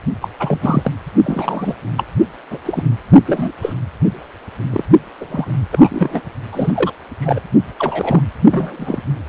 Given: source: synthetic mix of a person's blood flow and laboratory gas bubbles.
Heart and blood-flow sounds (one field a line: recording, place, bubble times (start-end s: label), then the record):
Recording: Doppler ultrasound of blood flow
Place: precordium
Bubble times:
0.21-0.28 s: bubbles
0.39-0.92 s: bubbles
1.24-1.74 s: bubbles
1.96-2.04 s: bubbles
2.50-2.58 s: bubbles
2.65-2.83 s: bubbles
3.27-3.52 s: bubbles
3.61-3.73 s: bubbles
4.71-4.84 s: bubbles
5.21-5.26 s: bubbles
5.28-5.55 s: bubbles
5.72-6.21 s: bubbles
6.52-6.93 s: bubbles
7.21-7.40 s: bubbles
7.79-8.22 s: bubbles
8.50-9.03 s: bubbles
From the record:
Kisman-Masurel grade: 243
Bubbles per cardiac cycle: several, 3 to 8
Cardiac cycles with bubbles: 100%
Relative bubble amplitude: loud (0.450 to 0.775)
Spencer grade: 3 (all of the cardiac periods contain showers or single bubble signals, but not dominating or overriding the cardiac motion signals)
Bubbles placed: only in the low amplitude regions of the cardiac cycle